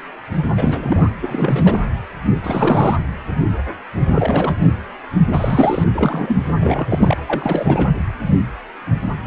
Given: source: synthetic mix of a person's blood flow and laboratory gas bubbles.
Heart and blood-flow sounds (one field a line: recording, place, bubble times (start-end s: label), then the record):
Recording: Doppler ultrasound of blood flow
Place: precordium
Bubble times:
0.55-1.09 s: bubbles
1.22-1.82 s: bubbles
2.43-2.96 s: bubbles
4.15-4.54 s: bubbles
4.59-4.71 s: bubbles
5.31-5.84 s: bubbles
5.94-6.36 s: bubbles
6.59-6.87 s: bubbles
6.90-7.16 s: bubbles
7.26-7.88 s: bubbles
From the record:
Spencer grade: 3 (all of the cardiac periods contain showers or single bubble signals, but not dominating or overriding the cardiac motion signals)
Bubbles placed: anywhere in the cardiac cycle